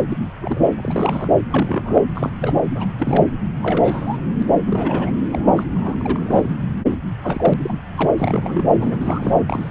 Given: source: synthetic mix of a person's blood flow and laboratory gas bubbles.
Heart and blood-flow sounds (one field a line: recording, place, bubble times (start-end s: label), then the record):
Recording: Doppler ultrasound of blood flow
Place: subclavian vein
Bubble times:
0.00-0.06 s: bubbles
0.10-0.16 s: bubbles
0.41-0.61 s: bubbles
0.74-1.29 s: bubbles
1.49-2.01 s: bubbles
2.14-2.31 s: bubbles
2.39-2.62 s: bubbles
2.75-2.92 s: bubbles
2.98-3.28 s: bubbles
3.62-4.17 s: bubbles
4.39-4.42 s: bubbles
4.67-5.10 s: bubbles
5.30-5.68 s: bubbles
5.75-5.96 s: bubbles
6.00-6.54 s: bubbles
6.89-6.97 s: bubbles
7.21-7.54 s: bubbles
7.63-7.78 s: bubbles
7.95-8.11 s: bubbles
8.17-8.74 s: bubbles
8.79-9.35 s: bubbles
9.46-9.71 s: bubbles
From the record:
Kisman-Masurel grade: 242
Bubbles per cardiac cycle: several, 3 to 8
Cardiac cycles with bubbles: 100%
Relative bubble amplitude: moderate (0.250 to 0.450)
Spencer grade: 3 (all of the cardiac periods contain showers or single bubble signals, but not dominating or overriding the cardiac motion signals)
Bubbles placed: anywhere in the cardiac cycle